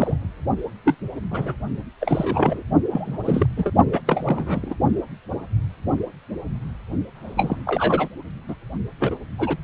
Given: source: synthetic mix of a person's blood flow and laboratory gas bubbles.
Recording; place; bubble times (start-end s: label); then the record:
Doppler ultrasound of blood flow; precordium
0.00-0.19 s: bubbles
0.22-0.30 s: bubbles
0.84-0.95 s: bubbles
1.30-1.55 s: bubbles
2.00-2.62 s: bubbles
2.91-3.19 s: bubbles
3.25-3.46 s: bubbles
3.56-3.72 s: bubbles
3.93-4.00 s: bubbles
4.07-4.75 s: bubbles
7.15-8.08 s: bubbles
8.49-8.55 s: bubbles
9.00-9.16 s: bubbles
9.38-9.58 s: bubbles
From the record:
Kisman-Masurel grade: 232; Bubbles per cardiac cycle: several, 3 to 8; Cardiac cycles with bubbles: 50 to 99%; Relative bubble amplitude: moderate (0.250 to 0.450); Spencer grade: 3 (all of the cardiac periods contain showers or single bubble signals, but not dominating or overriding the cardiac motion signals); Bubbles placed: only in the low amplitude regions of the cardiac cycle